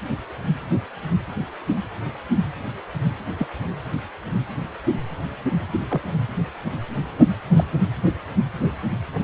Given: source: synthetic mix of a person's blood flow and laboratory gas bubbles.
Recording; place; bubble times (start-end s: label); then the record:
Doppler ultrasound of blood flow; precordium
3.38-3.47 s: bubbles
5.71-5.80 s: bubbles
5.89-6.10 s: bubbles
7.18-7.27 s: bubbles
7.56-7.64 s: bubbles
From the record:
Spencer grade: 2 (many but less than half of the cardiac periods contain bubble signals, singularly or in groups); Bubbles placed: anywhere in the cardiac cycle